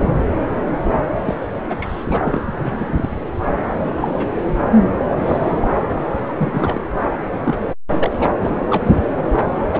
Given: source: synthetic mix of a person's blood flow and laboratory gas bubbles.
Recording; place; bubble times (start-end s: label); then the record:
Doppler ultrasound of blood flow; subclavian vein
0.00-0.09 s: bubbles
0.92-1.06 s: bubbles
1.25-1.35 s: bubbles
1.42-1.47 s: bubbles
1.69-1.77 s: bubbles
1.82-2.05 s: bubbles
2.08-2.42 s: bubbles
2.57-3.10 s: bubbles
3.98-4.32 s: bubbles
5.07-5.18 s: bubbles
5.23-5.68 s: bubbles
6.29-6.33 s: bubbles
6.37-6.82 s: bubbles
7.44-7.61 s: bubbles
7.95-8.29 s: bubbles
8.42-8.51 s: bubbles
8.67-8.92 s: bubbles
9.71-9.80 s: bubbles
From the record:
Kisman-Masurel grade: 242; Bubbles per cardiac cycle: several, 3 to 8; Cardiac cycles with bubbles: 100%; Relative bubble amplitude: moderate (0.250 to 0.450); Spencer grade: 3 (all of the cardiac periods contain showers or single bubble signals, but not dominating or overriding the cardiac motion signals); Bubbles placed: anywhere in the cardiac cycle